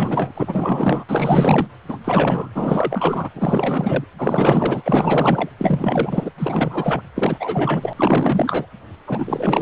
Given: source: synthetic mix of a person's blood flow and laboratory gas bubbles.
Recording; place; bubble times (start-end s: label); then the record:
Doppler ultrasound of blood flow; precordium
0.00-0.31 s: bubbles
0.34-1.05 s: bubbles
1.08-1.67 s: bubbles
1.88-1.98 s: bubbles
2.04-2.50 s: bubbles
2.54-3.29 s: bubbles
3.33-4.04 s: bubbles
4.17-5.50 s: bubbles
5.58-6.29 s: bubbles
6.38-7.01 s: bubbles
7.16-7.94 s: bubbles
7.96-8.67 s: bubbles
9.07-9.62 s: bubbles
From the record:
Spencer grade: 4 (maximum detectable bubble signal sounding continuously throughout systole and diastole of every cardiac period, and overriding the amplitude of the normal cardiac signals); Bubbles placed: anywhere in the cardiac cycle